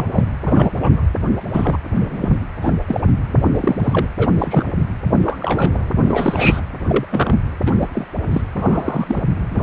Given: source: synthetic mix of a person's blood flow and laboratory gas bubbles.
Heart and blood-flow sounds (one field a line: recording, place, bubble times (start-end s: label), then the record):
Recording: Doppler ultrasound of blood flow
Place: precordium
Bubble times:
0.00-0.06 s: bubbles
0.11-0.27 s: bubbles
0.46-0.78 s: bubbles
0.81-1.01 s: bubbles
1.53-1.77 s: bubbles
1.95-2.37 s: bubbles
2.61-2.74 s: bubbles
2.88-3.06 s: bubbles
3.54-4.08 s: bubbles
4.17-4.30 s: bubbles
4.38-4.64 s: bubbles
5.13-5.18 s: bubbles
5.25-5.79 s: bubbles
5.96-6.60 s: bubbles
6.88-7.06 s: bubbles
7.12-7.37 s: bubbles
7.66-7.72 s: bubbles
7.80-7.88 s: bubbles
7.92-8.07 s: bubbles
8.31-8.42 s: bubbles
8.56-9.21 s: bubbles
9.51-9.62 s: bubbles
From the record:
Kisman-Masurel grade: 242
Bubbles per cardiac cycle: several, 3 to 8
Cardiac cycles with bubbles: 100%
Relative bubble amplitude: moderate (0.250 to 0.450)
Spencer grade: 3 (all of the cardiac periods contain showers or single bubble signals, but not dominating or overriding the cardiac motion signals)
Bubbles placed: anywhere in the cardiac cycle